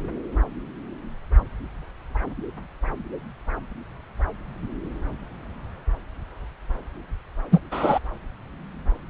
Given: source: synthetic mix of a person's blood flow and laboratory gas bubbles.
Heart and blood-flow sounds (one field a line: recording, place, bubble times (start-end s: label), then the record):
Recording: Doppler ultrasound of blood flow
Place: subclavian vein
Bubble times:
7.51-7.60 s: bubbles
7.71-7.99 s: bubbles
From the record:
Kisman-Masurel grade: 113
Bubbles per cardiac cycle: 1 to 2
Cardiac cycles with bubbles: 1 to 10%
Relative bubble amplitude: loud (0.450 to 0.775)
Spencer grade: 1 (occasional bubble signal discernible with the cardiac motion signal, with majority of cardiac periods free of bubbles)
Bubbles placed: anywhere in the cardiac cycle